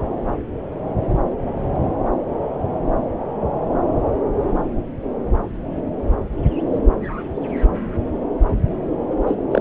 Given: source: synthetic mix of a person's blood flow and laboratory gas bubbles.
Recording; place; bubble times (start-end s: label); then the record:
Doppler ultrasound of blood flow; subclavian vein
9.26-9.38 s: bubbles
9.51-9.61 s: bubbles
From the record:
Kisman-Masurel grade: 213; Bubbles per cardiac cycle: several, 3 to 8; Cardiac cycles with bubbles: 1 to 10%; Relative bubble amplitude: loud (0.450 to 0.775); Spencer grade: 1 (occasional bubble signal discernible with the cardiac motion signal, with majority of cardiac periods free of bubbles); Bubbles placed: anywhere in the cardiac cycle